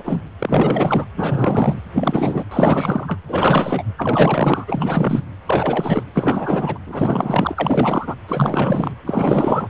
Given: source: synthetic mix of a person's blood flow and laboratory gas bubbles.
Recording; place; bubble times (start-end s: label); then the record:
Doppler ultrasound of blood flow; precordium
0.00-0.23 s: bubbles
0.39-1.06 s: bubbles
1.16-1.79 s: bubbles
1.93-2.44 s: bubbles
2.51-3.19 s: bubbles
3.29-3.83 s: bubbles
3.97-4.65 s: bubbles
4.67-5.25 s: bubbles
5.46-6.04 s: bubbles
6.13-6.79 s: bubbles
6.87-8.15 s: bubbles
8.28-8.94 s: bubbles
9.06-9.70 s: bubbles
From the record:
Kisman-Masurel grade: 444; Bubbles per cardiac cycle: continuous sound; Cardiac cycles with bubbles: 100%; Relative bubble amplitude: maximal (0.775 to 0.999); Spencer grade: 4 (maximum detectable bubble signal sounding continuously throughout systole and diastole of every cardiac period, and overriding the amplitude of the normal cardiac signals); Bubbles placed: anywhere in the cardiac cycle